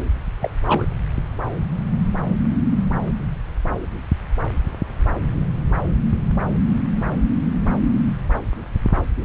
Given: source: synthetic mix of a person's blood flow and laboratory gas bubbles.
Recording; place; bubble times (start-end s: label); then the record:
Doppler ultrasound of blood flow; subclavian vein
0.42-0.50 s: bubbles
0.67-0.85 s: bubbles
From the record:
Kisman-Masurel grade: 212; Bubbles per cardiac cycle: several, 3 to 8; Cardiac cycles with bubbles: 1 to 10%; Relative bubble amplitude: moderate (0.250 to 0.450); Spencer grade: 1 (occasional bubble signal discernible with the cardiac motion signal, with majority of cardiac periods free of bubbles); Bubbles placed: anywhere in the cardiac cycle